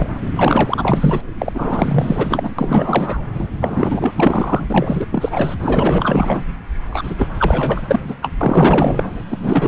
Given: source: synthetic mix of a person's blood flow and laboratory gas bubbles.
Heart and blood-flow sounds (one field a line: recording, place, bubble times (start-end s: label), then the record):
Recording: Doppler ultrasound of blood flow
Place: subclavian vein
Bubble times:
0.00-0.14 s: bubbles
0.36-1.21 s: bubbles
1.39-2.51 s: bubbles
2.58-3.23 s: bubbles
3.34-3.50 s: bubbles
3.61-4.67 s: bubbles
4.70-5.06 s: bubbles
5.12-5.29 s: bubbles
5.31-5.54 s: bubbles
5.59-6.45 s: bubbles
6.90-7.14 s: bubbles
7.17-7.27 s: bubbles
7.38-7.81 s: bubbles
7.87-8.00 s: bubbles
8.07-8.15 s: bubbles
8.22-8.30 s: bubbles
8.40-9.11 s: bubbles
9.30-9.38 s: bubbles
9.41-9.68 s: bubbles
From the record:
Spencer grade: 4 (maximum detectable bubble signal sounding continuously throughout systole and diastole of every cardiac period, and overriding the amplitude of the normal cardiac signals)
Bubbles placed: anywhere in the cardiac cycle